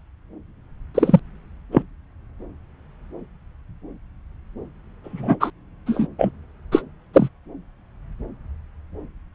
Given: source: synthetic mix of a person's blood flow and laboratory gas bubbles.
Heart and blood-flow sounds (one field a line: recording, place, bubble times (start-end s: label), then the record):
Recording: Doppler ultrasound of blood flow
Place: subclavian vein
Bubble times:
0.94-1.20 s: bubbles
1.72-1.82 s: bubbles
5.04-5.37 s: bubbles
5.40-5.50 s: bubbles
5.86-6.07 s: bubbles
6.18-6.31 s: bubbles
6.71-6.82 s: bubbles
7.13-7.29 s: bubbles
From the record:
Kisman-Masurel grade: 123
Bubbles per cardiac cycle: 1 to 2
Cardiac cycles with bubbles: 10 to 50%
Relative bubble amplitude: loud (0.450 to 0.775)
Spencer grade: 2 (many but less than half of the cardiac periods contain bubble signals, singularly or in groups)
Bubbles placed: anywhere in the cardiac cycle